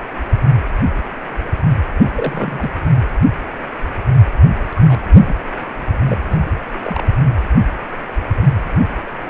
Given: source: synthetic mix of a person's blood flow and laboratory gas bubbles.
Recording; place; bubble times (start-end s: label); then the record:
Doppler ultrasound of blood flow; precordium
1.98-2.10 s: bubbles
2.15-2.71 s: bubbles
4.75-4.99 s: bubbles
5.25-5.35 s: bubbles
6.05-6.17 s: bubbles
6.30-6.39 s: bubbles
6.74-7.18 s: bubbles
From the record:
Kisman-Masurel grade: 221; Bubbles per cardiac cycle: several, 3 to 8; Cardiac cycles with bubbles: 10 to 50%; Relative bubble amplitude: barely perceptible (0.100 to 0.250); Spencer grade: 2 (many but less than half of the cardiac periods contain bubble signals, singularly or in groups); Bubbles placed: anywhere in the cardiac cycle